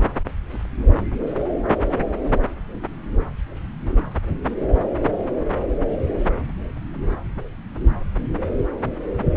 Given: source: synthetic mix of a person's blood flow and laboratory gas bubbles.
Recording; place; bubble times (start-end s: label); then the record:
Doppler ultrasound of blood flow; subclavian vein
no bubbles
From the record:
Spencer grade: 0 (complete lack of bubble signals)